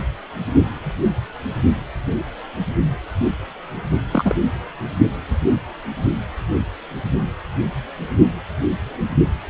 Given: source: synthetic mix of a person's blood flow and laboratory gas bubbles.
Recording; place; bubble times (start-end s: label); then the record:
Doppler ultrasound of blood flow; precordium
4.12-4.35 s: bubbles
From the record:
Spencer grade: 1 (occasional bubble signal discernible with the cardiac motion signal, with majority of cardiac periods free of bubbles); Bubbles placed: only in the low amplitude regions of the cardiac cycle